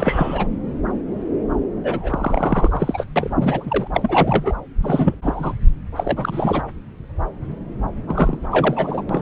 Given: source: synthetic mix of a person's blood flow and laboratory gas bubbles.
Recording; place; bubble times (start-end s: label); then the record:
Doppler ultrasound of blood flow; subclavian vein
0.00-0.47 s: bubbles
1.83-3.04 s: bubbles
3.16-3.35 s: bubbles
3.41-3.88 s: bubbles
3.93-4.54 s: bubbles
4.81-5.14 s: bubbles
5.22-5.54 s: bubbles
5.96-6.61 s: bubbles
8.08-8.38 s: bubbles
8.52-9.04 s: bubbles
9.09-9.22 s: bubbles
From the record:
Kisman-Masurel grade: 332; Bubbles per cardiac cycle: rolling drumbeat, 9 or more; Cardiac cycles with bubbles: 50 to 99%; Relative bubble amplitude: moderate (0.250 to 0.450); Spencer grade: 3 (all of the cardiac periods contain showers or single bubble signals, but not dominating or overriding the cardiac motion signals); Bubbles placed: anywhere in the cardiac cycle